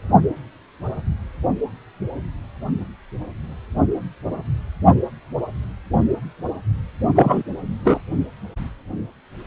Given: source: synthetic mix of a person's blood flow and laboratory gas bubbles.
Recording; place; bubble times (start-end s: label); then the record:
Doppler ultrasound of blood flow; precordium
7.15-7.43 s: bubbles
7.84-8.01 s: bubbles
From the record:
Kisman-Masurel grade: 113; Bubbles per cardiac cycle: 1 to 2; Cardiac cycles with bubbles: 1 to 10%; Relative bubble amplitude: loud (0.450 to 0.775); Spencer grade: 1 (occasional bubble signal discernible with the cardiac motion signal, with majority of cardiac periods free of bubbles); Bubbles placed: only in the low amplitude regions of the cardiac cycle